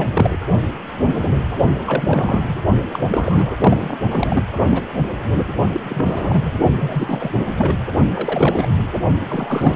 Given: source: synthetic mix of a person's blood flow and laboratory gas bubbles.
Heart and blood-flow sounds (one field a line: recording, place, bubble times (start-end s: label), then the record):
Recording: Doppler ultrasound of blood flow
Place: precordium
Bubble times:
0.00-0.10 s: bubbles
0.13-0.39 s: bubbles
1.85-2.57 s: bubbles
2.92-2.99 s: bubbles
3.11-3.55 s: bubbles
3.60-3.95 s: bubbles
4.10-4.43 s: bubbles
4.69-4.82 s: bubbles
5.73-5.81 s: bubbles
5.83-6.52 s: bubbles
6.79-7.32 s: bubbles
7.57-7.76 s: bubbles
8.16-8.76 s: bubbles
9.29-9.76 s: bubbles
From the record:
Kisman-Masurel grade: 332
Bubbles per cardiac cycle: rolling drumbeat, 9 or more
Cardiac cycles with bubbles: 50 to 99%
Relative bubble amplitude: moderate (0.250 to 0.450)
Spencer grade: 3 (all of the cardiac periods contain showers or single bubble signals, but not dominating or overriding the cardiac motion signals)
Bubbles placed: only in the low amplitude regions of the cardiac cycle